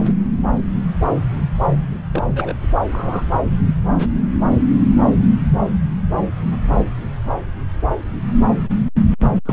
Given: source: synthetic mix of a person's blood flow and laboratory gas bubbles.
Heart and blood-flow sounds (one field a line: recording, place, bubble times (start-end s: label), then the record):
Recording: Doppler ultrasound of blood flow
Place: subclavian vein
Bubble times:
0.05-0.12 s: bubbles
2.13-2.53 s: bubbles
2.92-3.25 s: bubbles
9.46-9.53 s: bubbles
From the record:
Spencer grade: 2 (many but less than half of the cardiac periods contain bubble signals, singularly or in groups)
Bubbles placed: anywhere in the cardiac cycle